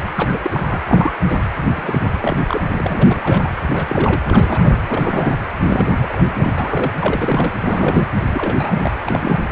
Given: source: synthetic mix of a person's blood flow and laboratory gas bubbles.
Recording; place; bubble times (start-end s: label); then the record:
Doppler ultrasound of blood flow; precordium
0.16-0.39 s: bubbles
0.42-0.79 s: bubbles
0.88-1.11 s: bubbles
1.26-1.45 s: bubbles
1.75-2.41 s: bubbles
2.47-2.64 s: bubbles
2.77-3.50 s: bubbles
3.71-4.22 s: bubbles
4.25-4.77 s: bubbles
4.86-5.38 s: bubbles
5.66-6.24 s: bubbles
6.34-6.54 s: bubbles
6.57-6.93 s: bubbles
6.99-7.52 s: bubbles
7.57-8.11 s: bubbles
8.29-8.96 s: bubbles
9.04-9.39 s: bubbles
From the record:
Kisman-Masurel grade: 342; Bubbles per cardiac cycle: rolling drumbeat, 9 or more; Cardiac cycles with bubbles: 100%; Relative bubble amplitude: moderate (0.250 to 0.450); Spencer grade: 3 (all of the cardiac periods contain showers or single bubble signals, but not dominating or overriding the cardiac motion signals); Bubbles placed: anywhere in the cardiac cycle